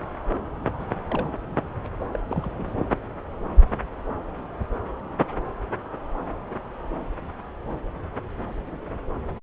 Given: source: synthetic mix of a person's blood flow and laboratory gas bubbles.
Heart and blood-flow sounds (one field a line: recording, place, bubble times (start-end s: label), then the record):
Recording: Doppler ultrasound of blood flow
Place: subclavian vein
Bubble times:
0.79-0.85 s: bubbles
1.10-1.30 s: bubbles
2.12-2.19 s: bubbles
2.28-2.52 s: bubbles
2.58-2.64 s: bubbles
2.67-2.73 s: bubbles
From the record:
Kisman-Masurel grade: 211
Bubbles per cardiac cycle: several, 3 to 8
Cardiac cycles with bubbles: 1 to 10%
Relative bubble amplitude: barely perceptible (0.100 to 0.250)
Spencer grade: 1 (occasional bubble signal discernible with the cardiac motion signal, with majority of cardiac periods free of bubbles)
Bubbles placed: anywhere in the cardiac cycle